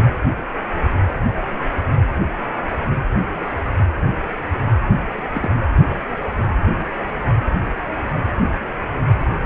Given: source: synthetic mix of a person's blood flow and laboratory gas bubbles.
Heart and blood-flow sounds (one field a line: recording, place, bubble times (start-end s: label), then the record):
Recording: Doppler ultrasound of blood flow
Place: precordium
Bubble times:
5.33-5.49 s: bubbles
From the record:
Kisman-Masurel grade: 111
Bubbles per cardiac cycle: 1 to 2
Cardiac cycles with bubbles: 1 to 10%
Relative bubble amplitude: barely perceptible (0.100 to 0.250)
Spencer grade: 1 (occasional bubble signal discernible with the cardiac motion signal, with majority of cardiac periods free of bubbles)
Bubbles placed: anywhere in the cardiac cycle